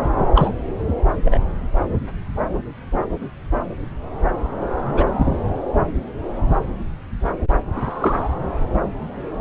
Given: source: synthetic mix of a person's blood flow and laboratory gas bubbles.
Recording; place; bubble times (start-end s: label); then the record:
Doppler ultrasound of blood flow; subclavian vein
0.34-0.52 s: bubbles
1.25-1.40 s: bubbles
4.93-5.04 s: bubbles
5.17-5.38 s: bubbles
7.90-8.34 s: bubbles
From the record:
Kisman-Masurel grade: 123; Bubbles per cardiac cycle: 1 to 2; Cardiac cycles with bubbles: 10 to 50%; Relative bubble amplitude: loud (0.450 to 0.775); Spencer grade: 2 (many but less than half of the cardiac periods contain bubble signals, singularly or in groups); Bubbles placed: anywhere in the cardiac cycle